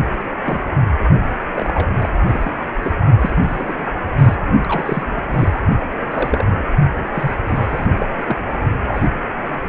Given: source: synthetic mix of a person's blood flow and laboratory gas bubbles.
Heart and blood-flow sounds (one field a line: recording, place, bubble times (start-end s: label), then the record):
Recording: Doppler ultrasound of blood flow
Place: precordium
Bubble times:
0.45-0.61 s: bubbles
1.55-1.96 s: bubbles
1.99-2.09 s: bubbles
2.26-2.56 s: bubbles
2.82-2.92 s: bubbles
3.19-3.85 s: bubbles
4.19-4.36 s: bubbles
4.64-5.04 s: bubbles
5.15-5.62 s: bubbles
5.80-5.86 s: bubbles
6.10-6.45 s: bubbles
7.14-7.33 s: bubbles
7.46-7.87 s: bubbles
7.98-8.06 s: bubbles
8.16-8.37 s: bubbles
8.84-9.09 s: bubbles
9.51-9.56 s: bubbles
From the record:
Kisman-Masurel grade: 242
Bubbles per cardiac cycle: several, 3 to 8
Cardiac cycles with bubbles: 100%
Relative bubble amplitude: moderate (0.250 to 0.450)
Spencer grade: 3 (all of the cardiac periods contain showers or single bubble signals, but not dominating or overriding the cardiac motion signals)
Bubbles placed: only in the low amplitude regions of the cardiac cycle